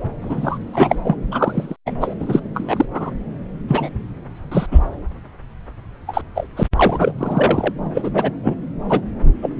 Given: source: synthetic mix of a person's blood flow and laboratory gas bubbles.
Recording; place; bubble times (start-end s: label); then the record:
Doppler ultrasound of blood flow; subclavian vein
0.21-0.58 s: bubbles
0.73-0.96 s: bubbles
1.04-1.16 s: bubbles
1.31-1.76 s: bubbles
1.86-1.92 s: bubbles
2.00-2.15 s: bubbles
2.19-2.42 s: bubbles
2.54-2.85 s: bubbles
2.94-3.10 s: bubbles
3.67-3.91 s: bubbles
4.51-4.66 s: bubbles
4.71-4.79 s: bubbles
6.07-6.21 s: bubbles
6.34-6.47 s: bubbles
6.56-6.63 s: bubbles
6.75-7.13 s: bubbles
7.17-7.72 s: bubbles
7.95-8.11 s: bubbles
8.14-8.30 s: bubbles
8.43-8.56 s: bubbles
8.89-9.01 s: bubbles
9.42-9.49 s: bubbles
From the record:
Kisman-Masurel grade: 243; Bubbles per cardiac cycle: several, 3 to 8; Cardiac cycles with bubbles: 100%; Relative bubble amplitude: loud (0.450 to 0.775); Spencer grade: 3 (all of the cardiac periods contain showers or single bubble signals, but not dominating or overriding the cardiac motion signals); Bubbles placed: anywhere in the cardiac cycle